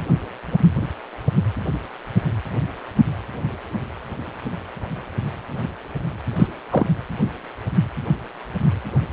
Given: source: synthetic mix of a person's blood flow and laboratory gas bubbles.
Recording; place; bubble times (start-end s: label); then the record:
Doppler ultrasound of blood flow; precordium
6.36-6.48 s: bubbles
6.72-6.89 s: bubbles
From the record:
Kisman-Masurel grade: 113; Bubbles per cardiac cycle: 1 to 2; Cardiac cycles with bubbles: 1 to 10%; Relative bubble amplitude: loud (0.450 to 0.775); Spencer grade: 1 (occasional bubble signal discernible with the cardiac motion signal, with majority of cardiac periods free of bubbles); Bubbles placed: anywhere in the cardiac cycle